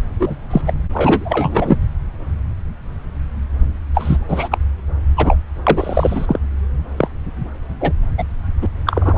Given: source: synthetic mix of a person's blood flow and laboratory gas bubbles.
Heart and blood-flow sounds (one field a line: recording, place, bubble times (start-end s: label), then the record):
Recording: Doppler ultrasound of blood flow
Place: subclavian vein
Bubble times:
0.19-0.36 s: bubbles
0.51-0.61 s: bubbles
0.67-0.73 s: bubbles
0.93-1.78 s: bubbles
3.95-4.17 s: bubbles
4.29-4.58 s: bubbles
5.17-5.38 s: bubbles
5.67-6.39 s: bubbles
6.96-7.08 s: bubbles
7.80-7.92 s: bubbles
8.17-8.23 s: bubbles
8.62-8.66 s: bubbles
8.85-9.18 s: bubbles
From the record:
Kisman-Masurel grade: 233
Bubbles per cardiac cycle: several, 3 to 8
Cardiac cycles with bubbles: 50 to 99%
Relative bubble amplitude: loud (0.450 to 0.775)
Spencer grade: 3 (all of the cardiac periods contain showers or single bubble signals, but not dominating or overriding the cardiac motion signals)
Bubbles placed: anywhere in the cardiac cycle